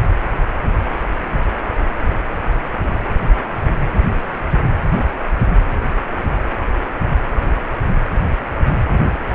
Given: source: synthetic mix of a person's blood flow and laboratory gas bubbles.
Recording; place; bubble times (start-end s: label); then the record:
Doppler ultrasound of blood flow; precordium
no bubbles
From the record:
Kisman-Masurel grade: 000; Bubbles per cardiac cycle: 0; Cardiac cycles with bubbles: 0%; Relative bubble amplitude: no bubbles discernible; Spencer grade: 0 (complete lack of bubble signals)